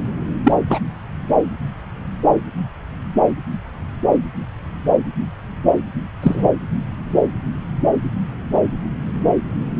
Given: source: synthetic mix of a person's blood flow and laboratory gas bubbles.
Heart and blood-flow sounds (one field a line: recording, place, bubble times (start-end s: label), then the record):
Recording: Doppler ultrasound of blood flow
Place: subclavian vein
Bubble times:
0.44-0.54 s: bubbles
0.69-0.79 s: bubbles
6.22-6.48 s: bubbles
From the record:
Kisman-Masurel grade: 113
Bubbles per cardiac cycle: 1 to 2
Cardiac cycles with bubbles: 1 to 10%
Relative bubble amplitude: loud (0.450 to 0.775)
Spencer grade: 1 (occasional bubble signal discernible with the cardiac motion signal, with majority of cardiac periods free of bubbles)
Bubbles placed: anywhere in the cardiac cycle